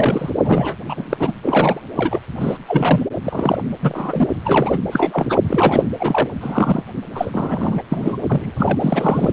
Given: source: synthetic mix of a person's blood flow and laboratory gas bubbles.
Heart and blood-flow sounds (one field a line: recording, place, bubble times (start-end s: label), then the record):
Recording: Doppler ultrasound of blood flow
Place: precordium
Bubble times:
0.00-0.30 s: bubbles
0.36-0.75 s: bubbles
0.89-1.17 s: bubbles
1.20-1.33 s: bubbles
1.43-1.80 s: bubbles
1.96-2.19 s: bubbles
2.40-2.57 s: bubbles
2.68-3.06 s: bubbles
3.23-3.61 s: bubbles
3.82-4.28 s: bubbles
4.44-4.77 s: bubbles
4.92-5.38 s: bubbles
5.43-5.82 s: bubbles
6.00-6.27 s: bubbles
6.41-6.83 s: bubbles
7.14-7.82 s: bubbles
7.92-8.17 s: bubbles
8.27-8.51 s: bubbles
8.57-9.31 s: bubbles
From the record:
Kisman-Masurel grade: 242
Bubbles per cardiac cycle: several, 3 to 8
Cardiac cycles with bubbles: 100%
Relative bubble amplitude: moderate (0.250 to 0.450)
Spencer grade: 3 (all of the cardiac periods contain showers or single bubble signals, but not dominating or overriding the cardiac motion signals)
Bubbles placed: anywhere in the cardiac cycle